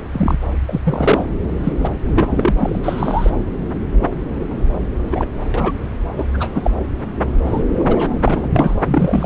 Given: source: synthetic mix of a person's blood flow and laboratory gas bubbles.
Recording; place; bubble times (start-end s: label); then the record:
Doppler ultrasound of blood flow; subclavian vein
0.12-0.38 s: bubbles
0.67-0.81 s: bubbles
0.83-1.26 s: bubbles
1.64-1.73 s: bubbles
1.78-1.91 s: bubbles
2.14-2.54 s: bubbles
2.57-2.79 s: bubbles
2.83-3.32 s: bubbles
5.11-5.25 s: bubbles
5.54-5.71 s: bubbles
6.17-6.25 s: bubbles
6.33-6.71 s: bubbles
7.44-7.64 s: bubbles
7.79-8.09 s: bubbles
8.23-8.48 s: bubbles
8.54-8.75 s: bubbles
8.85-9.26 s: bubbles
From the record:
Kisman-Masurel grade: 232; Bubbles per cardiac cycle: several, 3 to 8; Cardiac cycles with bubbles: 50 to 99%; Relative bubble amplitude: moderate (0.250 to 0.450); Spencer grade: 3 (all of the cardiac periods contain showers or single bubble signals, but not dominating or overriding the cardiac motion signals); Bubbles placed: anywhere in the cardiac cycle